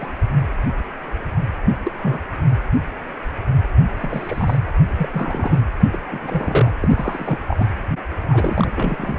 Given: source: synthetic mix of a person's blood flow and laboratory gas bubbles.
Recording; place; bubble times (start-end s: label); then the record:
Doppler ultrasound of blood flow; precordium
0.00-0.08 s: bubbles
1.85-1.92 s: bubbles
2.01-2.21 s: bubbles
3.99-4.58 s: bubbles
4.96-5.60 s: bubbles
5.92-5.99 s: bubbles
6.08-6.73 s: bubbles
6.80-7.38 s: bubbles
7.48-7.71 s: bubbles
8.29-8.71 s: bubbles
8.75-9.19 s: bubbles
From the record:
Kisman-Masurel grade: 232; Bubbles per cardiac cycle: several, 3 to 8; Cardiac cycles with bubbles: 50 to 99%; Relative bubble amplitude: moderate (0.250 to 0.450); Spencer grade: 3 (all of the cardiac periods contain showers or single bubble signals, but not dominating or overriding the cardiac motion signals); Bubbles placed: anywhere in the cardiac cycle